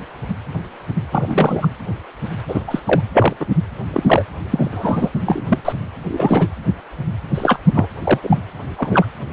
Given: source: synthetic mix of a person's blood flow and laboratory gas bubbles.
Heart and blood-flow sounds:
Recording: Doppler ultrasound of blood flow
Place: precordium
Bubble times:
1.11-1.68 s: bubbles
2.48-2.64 s: bubbles
2.68-2.79 s: bubbles
2.85-3.01 s: bubbles
3.14-3.33 s: bubbles
3.40-3.46 s: bubbles
3.93-4.25 s: bubbles
4.51-4.69 s: bubbles
4.72-5.09 s: bubbles
5.25-5.58 s: bubbles
5.64-5.72 s: bubbles
6.08-6.47 s: bubbles
7.34-7.59 s: bubbles
7.74-7.86 s: bubbles
8.04-8.19 s: bubbles
8.23-8.39 s: bubbles
8.76-9.05 s: bubbles
From the record:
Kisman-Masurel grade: 233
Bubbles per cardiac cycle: several, 3 to 8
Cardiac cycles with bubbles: 50 to 99%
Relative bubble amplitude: loud (0.450 to 0.775)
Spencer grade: 3 (all of the cardiac periods contain showers or single bubble signals, but not dominating or overriding the cardiac motion signals)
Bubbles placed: anywhere in the cardiac cycle

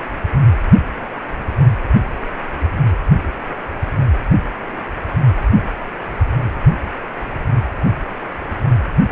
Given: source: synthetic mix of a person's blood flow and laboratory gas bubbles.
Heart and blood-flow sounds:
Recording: Doppler ultrasound of blood flow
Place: precordium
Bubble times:
no bubbles
From the record:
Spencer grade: 0 (complete lack of bubble signals)

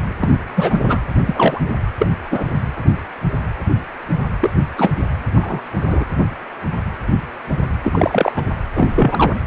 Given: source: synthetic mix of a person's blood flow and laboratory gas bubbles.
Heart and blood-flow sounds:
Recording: Doppler ultrasound of blood flow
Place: precordium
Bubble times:
0.20-0.37 s: bubbles
0.56-0.80 s: bubbles
0.87-0.98 s: bubbles
1.27-1.60 s: bubbles
1.99-2.07 s: bubbles
2.30-2.45 s: bubbles
4.41-4.50 s: bubbles
4.77-4.91 s: bubbles
5.34-5.62 s: bubbles
5.77-6.04 s: bubbles
7.84-8.32 s: bubbles
8.37-8.44 s: bubbles
8.75-8.88 s: bubbles
8.95-9.41 s: bubbles
From the record:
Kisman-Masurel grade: 223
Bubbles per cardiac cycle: several, 3 to 8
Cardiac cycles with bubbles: 10 to 50%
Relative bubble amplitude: loud (0.450 to 0.775)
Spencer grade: 2 (many but less than half of the cardiac periods contain bubble signals, singularly or in groups)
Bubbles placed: anywhere in the cardiac cycle

